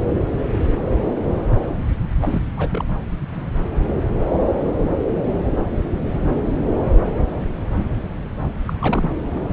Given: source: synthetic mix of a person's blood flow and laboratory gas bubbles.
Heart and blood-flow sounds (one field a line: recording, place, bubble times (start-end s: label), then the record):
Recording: Doppler ultrasound of blood flow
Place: subclavian vein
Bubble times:
2.22-2.41 s: bubbles
2.56-2.98 s: bubbles
8.65-8.73 s: bubbles
8.81-9.10 s: bubbles
From the record:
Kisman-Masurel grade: 212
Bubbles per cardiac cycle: several, 3 to 8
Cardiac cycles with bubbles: 1 to 10%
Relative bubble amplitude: moderate (0.250 to 0.450)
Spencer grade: 1 (occasional bubble signal discernible with the cardiac motion signal, with majority of cardiac periods free of bubbles)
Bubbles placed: anywhere in the cardiac cycle